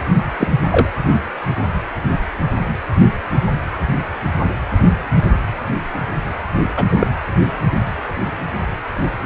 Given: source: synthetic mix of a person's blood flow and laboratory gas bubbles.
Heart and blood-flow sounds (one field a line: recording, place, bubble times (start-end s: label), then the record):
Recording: Doppler ultrasound of blood flow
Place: precordium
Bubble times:
0.38-0.48 s: bubbles
0.71-0.89 s: bubbles
6.76-6.84 s: bubbles
6.99-7.07 s: bubbles
From the record:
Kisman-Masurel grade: 123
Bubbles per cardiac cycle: 1 to 2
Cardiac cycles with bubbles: 10 to 50%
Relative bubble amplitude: loud (0.450 to 0.775)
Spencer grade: 2 (many but less than half of the cardiac periods contain bubble signals, singularly or in groups)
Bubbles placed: anywhere in the cardiac cycle